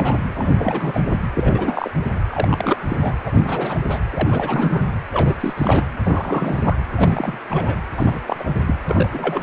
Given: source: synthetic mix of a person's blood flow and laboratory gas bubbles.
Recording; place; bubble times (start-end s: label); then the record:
Doppler ultrasound of blood flow; precordium
0.00-0.23 s: bubbles
0.34-1.01 s: bubbles
1.34-1.91 s: bubbles
2.28-2.78 s: bubbles
2.88-2.96 s: bubbles
3.01-3.15 s: bubbles
3.25-3.79 s: bubbles
3.84-4.01 s: bubbles
4.12-4.82 s: bubbles
5.12-5.34 s: bubbles
5.40-5.54 s: bubbles
5.56-5.86 s: bubbles
6.03-6.75 s: bubbles
6.96-7.38 s: bubbles
7.50-7.77 s: bubbles
7.96-8.20 s: bubbles
8.27-8.52 s: bubbles
8.67-8.75 s: bubbles
8.89-9.41 s: bubbles
From the record:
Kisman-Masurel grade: 342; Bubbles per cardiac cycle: rolling drumbeat, 9 or more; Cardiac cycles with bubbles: 100%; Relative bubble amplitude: moderate (0.250 to 0.450); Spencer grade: 3 (all of the cardiac periods contain showers or single bubble signals, but not dominating or overriding the cardiac motion signals); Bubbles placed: anywhere in the cardiac cycle